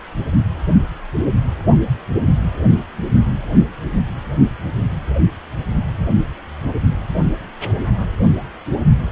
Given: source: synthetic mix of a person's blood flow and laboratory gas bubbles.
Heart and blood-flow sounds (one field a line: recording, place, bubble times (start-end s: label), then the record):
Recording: Doppler ultrasound of blood flow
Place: precordium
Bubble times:
no bubbles
From the record:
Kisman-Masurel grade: 000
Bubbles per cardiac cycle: 0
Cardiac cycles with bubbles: 0%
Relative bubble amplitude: no bubbles discernible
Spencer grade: 0 (complete lack of bubble signals)